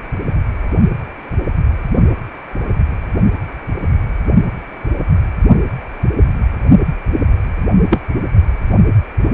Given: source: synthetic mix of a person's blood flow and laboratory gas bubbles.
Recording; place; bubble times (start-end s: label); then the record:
Doppler ultrasound of blood flow; precordium
7.90-8.01 s: bubbles
From the record:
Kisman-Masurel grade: 123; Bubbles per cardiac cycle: 1 to 2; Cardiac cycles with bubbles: 10 to 50%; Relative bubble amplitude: loud (0.450 to 0.775); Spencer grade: 2 (many but less than half of the cardiac periods contain bubble signals, singularly or in groups); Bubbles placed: only in the low amplitude regions of the cardiac cycle